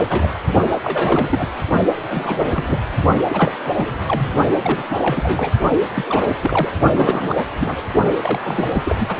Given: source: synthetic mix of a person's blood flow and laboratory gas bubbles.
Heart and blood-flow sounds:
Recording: Doppler ultrasound of blood flow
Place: precordium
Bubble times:
0.00-0.33 s: bubbles
0.82-1.48 s: bubbles
1.95-2.50 s: bubbles
2.53-2.78 s: bubbles
3.29-3.52 s: bubbles
3.73-4.30 s: bubbles
4.62-4.83 s: bubbles
4.89-4.97 s: bubbles
5.01-5.51 s: bubbles
5.94-6.34 s: bubbles
6.42-6.72 s: bubbles
6.93-7.44 s: bubbles
7.60-7.76 s: bubbles
8.21-8.40 s: bubbles
8.43-8.96 s: bubbles
9.00-9.16 s: bubbles
From the record:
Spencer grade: 3 (all of the cardiac periods contain showers or single bubble signals, but not dominating or overriding the cardiac motion signals)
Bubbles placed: only in the low amplitude regions of the cardiac cycle

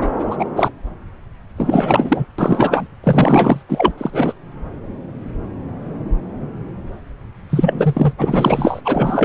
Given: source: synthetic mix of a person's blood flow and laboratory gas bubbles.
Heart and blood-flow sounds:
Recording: Doppler ultrasound of blood flow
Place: subclavian vein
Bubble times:
0.00-0.08 s: bubbles
0.18-0.27 s: bubbles
0.30-0.37 s: bubbles
0.39-0.46 s: bubbles
0.55-0.70 s: bubbles
1.57-2.25 s: bubbles
2.38-2.88 s: bubbles
3.03-3.62 s: bubbles
3.69-3.92 s: bubbles
3.97-4.33 s: bubbles
7.50-8.13 s: bubbles
8.18-8.81 s: bubbles
8.85-9.25 s: bubbles
From the record:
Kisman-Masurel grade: 333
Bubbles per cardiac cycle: rolling drumbeat, 9 or more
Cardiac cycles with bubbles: 50 to 99%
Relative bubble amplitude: loud (0.450 to 0.775)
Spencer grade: 3 (all of the cardiac periods contain showers or single bubble signals, but not dominating or overriding the cardiac motion signals)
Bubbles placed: anywhere in the cardiac cycle

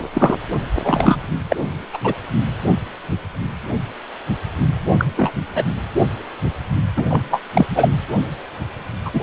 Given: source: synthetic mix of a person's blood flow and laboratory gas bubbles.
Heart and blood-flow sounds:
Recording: Doppler ultrasound of blood flow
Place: precordium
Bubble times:
0.14-0.35 s: bubbles
0.84-1.33 s: bubbles
1.50-1.56 s: bubbles
1.93-1.98 s: bubbles
2.04-2.14 s: bubbles
4.98-5.05 s: bubbles
5.16-5.32 s: bubbles
5.55-5.63 s: bubbles
6.96-7.04 s: bubbles
7.08-7.41 s: bubbles
7.54-7.67 s: bubbles
7.75-7.89 s: bubbles
9.05-9.22 s: bubbles
From the record:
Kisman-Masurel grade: 233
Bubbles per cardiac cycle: several, 3 to 8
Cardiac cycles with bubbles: 50 to 99%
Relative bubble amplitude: loud (0.450 to 0.775)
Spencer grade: 3 (all of the cardiac periods contain showers or single bubble signals, but not dominating or overriding the cardiac motion signals)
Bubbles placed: anywhere in the cardiac cycle

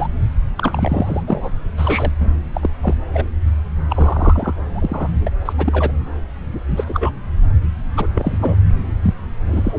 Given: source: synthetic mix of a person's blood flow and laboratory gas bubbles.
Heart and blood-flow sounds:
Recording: Doppler ultrasound of blood flow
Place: subclavian vein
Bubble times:
0.00-0.08 s: bubbles
0.56-1.23 s: bubbles
1.27-1.50 s: bubbles
1.77-2.12 s: bubbles
2.20-2.31 s: bubbles
2.54-2.70 s: bubbles
2.83-2.95 s: bubbles
3.13-3.27 s: bubbles
3.89-4.53 s: bubbles
4.74-5.08 s: bubbles
5.26-5.29 s: bubbles
5.45-5.53 s: bubbles
5.57-5.92 s: bubbles
6.76-6.84 s: bubbles
6.88-7.11 s: bubbles
7.96-8.08 s: bubbles
8.14-8.55 s: bubbles
9.02-9.14 s: bubbles
9.47-9.79 s: bubbles
From the record:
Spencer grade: 3 (all of the cardiac periods contain showers or single bubble signals, but not dominating or overriding the cardiac motion signals)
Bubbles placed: anywhere in the cardiac cycle

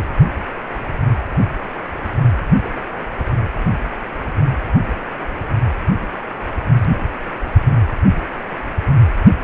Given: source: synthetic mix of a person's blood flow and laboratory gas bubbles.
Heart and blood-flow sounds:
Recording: Doppler ultrasound of blood flow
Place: precordium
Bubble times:
2.63-2.70 s: bubbles
From the record:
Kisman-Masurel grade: 111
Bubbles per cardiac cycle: 1 to 2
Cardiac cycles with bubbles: 1 to 10%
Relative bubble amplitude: barely perceptible (0.100 to 0.250)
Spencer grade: 1 (occasional bubble signal discernible with the cardiac motion signal, with majority of cardiac periods free of bubbles)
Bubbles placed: anywhere in the cardiac cycle

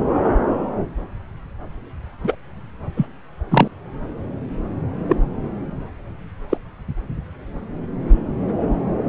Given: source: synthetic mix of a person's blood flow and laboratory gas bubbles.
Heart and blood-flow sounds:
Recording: Doppler ultrasound of blood flow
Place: subclavian vein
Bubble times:
2.23-2.35 s: bubbles
2.96-3.06 s: bubbles
3.51-3.68 s: bubbles
5.06-5.16 s: bubbles
6.49-6.57 s: bubbles
From the record:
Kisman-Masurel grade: 123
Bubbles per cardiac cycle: 1 to 2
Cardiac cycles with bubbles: 10 to 50%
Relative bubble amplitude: loud (0.450 to 0.775)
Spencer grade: 2 (many but less than half of the cardiac periods contain bubble signals, singularly or in groups)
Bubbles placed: anywhere in the cardiac cycle

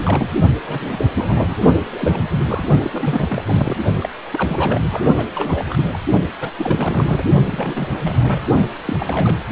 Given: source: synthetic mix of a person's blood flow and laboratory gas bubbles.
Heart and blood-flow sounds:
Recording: Doppler ultrasound of blood flow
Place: precordium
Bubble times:
0.00-0.29 s: bubbles
0.67-1.06 s: bubbles
1.15-1.57 s: bubbles
1.92-2.62 s: bubbles
2.84-3.76 s: bubbles
4.00-4.09 s: bubbles
4.33-4.81 s: bubbles
4.90-5.04 s: bubbles
5.17-5.29 s: bubbles
5.34-6.00 s: bubbles
6.40-6.50 s: bubbles
6.58-7.23 s: bubbles
7.50-8.40 s: bubbles
8.85-9.44 s: bubbles
From the record:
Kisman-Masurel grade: 342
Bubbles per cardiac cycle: rolling drumbeat, 9 or more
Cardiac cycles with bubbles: 100%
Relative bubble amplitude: moderate (0.250 to 0.450)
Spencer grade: 3 (all of the cardiac periods contain showers or single bubble signals, but not dominating or overriding the cardiac motion signals)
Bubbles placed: only in the low amplitude regions of the cardiac cycle

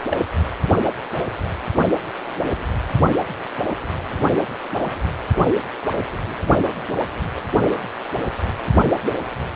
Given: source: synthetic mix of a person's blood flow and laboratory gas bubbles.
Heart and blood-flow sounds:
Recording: Doppler ultrasound of blood flow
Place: precordium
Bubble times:
0.10-0.26 s: bubbles
From the record:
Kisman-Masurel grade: 222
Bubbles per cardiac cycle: several, 3 to 8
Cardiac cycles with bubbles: 10 to 50%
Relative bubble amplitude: moderate (0.250 to 0.450)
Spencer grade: 2 (many but less than half of the cardiac periods contain bubble signals, singularly or in groups)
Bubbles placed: anywhere in the cardiac cycle

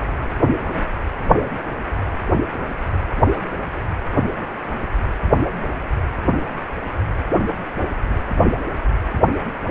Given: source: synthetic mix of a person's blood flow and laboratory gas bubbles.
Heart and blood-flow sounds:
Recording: Doppler ultrasound of blood flow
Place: precordium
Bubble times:
no bubbles
From the record:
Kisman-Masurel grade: 000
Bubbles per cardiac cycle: 0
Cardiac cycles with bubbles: 0%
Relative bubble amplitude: no bubbles discernible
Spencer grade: 0 (complete lack of bubble signals)

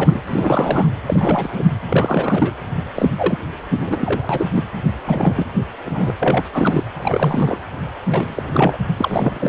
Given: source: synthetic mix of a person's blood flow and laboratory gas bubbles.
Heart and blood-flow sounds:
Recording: Doppler ultrasound of blood flow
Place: precordium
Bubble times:
0.00-0.20 s: bubbles
0.27-0.86 s: bubbles
1.07-1.63 s: bubbles
1.86-2.53 s: bubbles
2.94-3.08 s: bubbles
3.18-3.38 s: bubbles
3.78-4.46 s: bubbles
4.53-4.64 s: bubbles
5.07-5.51 s: bubbles
5.85-6.12 s: bubbles
6.20-6.48 s: bubbles
6.54-6.83 s: bubbles
6.96-7.60 s: bubbles
8.08-8.42 s: bubbles
8.52-8.77 s: bubbles
8.97-9.49 s: bubbles
From the record:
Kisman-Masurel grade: 342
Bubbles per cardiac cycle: rolling drumbeat, 9 or more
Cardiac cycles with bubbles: 100%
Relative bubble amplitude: moderate (0.250 to 0.450)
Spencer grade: 3 (all of the cardiac periods contain showers or single bubble signals, but not dominating or overriding the cardiac motion signals)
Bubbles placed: anywhere in the cardiac cycle

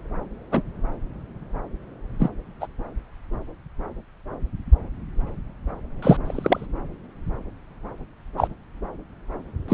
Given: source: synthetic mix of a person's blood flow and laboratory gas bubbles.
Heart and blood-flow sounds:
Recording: Doppler ultrasound of blood flow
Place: subclavian vein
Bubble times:
0.51-0.62 s: bubbles
2.19-2.30 s: bubbles
2.60-2.67 s: bubbles
6.02-6.17 s: bubbles
6.25-6.66 s: bubbles
8.37-8.47 s: bubbles
9.68-9.74 s: bubbles
From the record:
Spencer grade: 2 (many but less than half of the cardiac periods contain bubble signals, singularly or in groups)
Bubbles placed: anywhere in the cardiac cycle

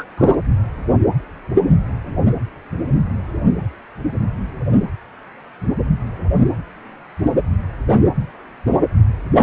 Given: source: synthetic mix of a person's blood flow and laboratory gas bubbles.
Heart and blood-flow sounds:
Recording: Doppler ultrasound of blood flow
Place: precordium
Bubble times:
0.00-0.04 s: bubbles
0.17-0.34 s: bubbles
From the record:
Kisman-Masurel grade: 213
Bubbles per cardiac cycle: several, 3 to 8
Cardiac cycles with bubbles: 1 to 10%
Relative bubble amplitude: loud (0.450 to 0.775)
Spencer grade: 1 (occasional bubble signal discernible with the cardiac motion signal, with majority of cardiac periods free of bubbles)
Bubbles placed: anywhere in the cardiac cycle

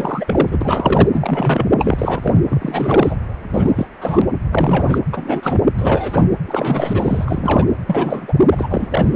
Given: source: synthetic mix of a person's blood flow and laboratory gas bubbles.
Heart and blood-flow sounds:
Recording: Doppler ultrasound of blood flow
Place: precordium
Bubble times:
0.00-0.57 s: bubbles
0.60-1.10 s: bubbles
1.12-1.68 s: bubbles
1.77-2.41 s: bubbles
2.48-3.16 s: bubbles
3.54-3.87 s: bubbles
4.01-4.27 s: bubbles
4.52-4.98 s: bubbles
5.11-5.61 s: bubbles
5.77-6.25 s: bubbles
6.47-7.67 s: bubbles
7.87-8.33 s: bubbles
8.51-9.13 s: bubbles
From the record:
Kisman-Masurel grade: 343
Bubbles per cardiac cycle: rolling drumbeat, 9 or more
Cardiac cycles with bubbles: 100%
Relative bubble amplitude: loud (0.450 to 0.775)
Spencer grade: 3 (all of the cardiac periods contain showers or single bubble signals, but not dominating or overriding the cardiac motion signals)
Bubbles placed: anywhere in the cardiac cycle

